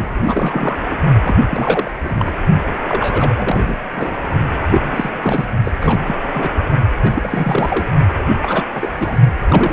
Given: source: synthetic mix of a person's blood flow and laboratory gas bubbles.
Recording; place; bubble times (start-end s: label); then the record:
Doppler ultrasound of blood flow; precordium
0.00-0.79 s: bubbles
0.91-0.95 s: bubbles
1.23-1.36 s: bubbles
1.49-1.91 s: bubbles
2.03-2.38 s: bubbles
2.88-3.78 s: bubbles
3.93-4.17 s: bubbles
4.70-5.45 s: bubbles
5.65-5.72 s: bubbles
5.81-6.16 s: bubbles
6.23-6.50 s: bubbles
6.96-7.86 s: bubbles
8.42-8.63 s: bubbles
8.74-8.93 s: bubbles
8.98-9.18 s: bubbles
9.41-9.73 s: bubbles
From the record:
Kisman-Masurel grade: 342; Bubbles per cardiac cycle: rolling drumbeat, 9 or more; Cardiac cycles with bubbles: 100%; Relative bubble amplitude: moderate (0.250 to 0.450); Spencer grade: 3 (all of the cardiac periods contain showers or single bubble signals, but not dominating or overriding the cardiac motion signals); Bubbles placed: only in the low amplitude regions of the cardiac cycle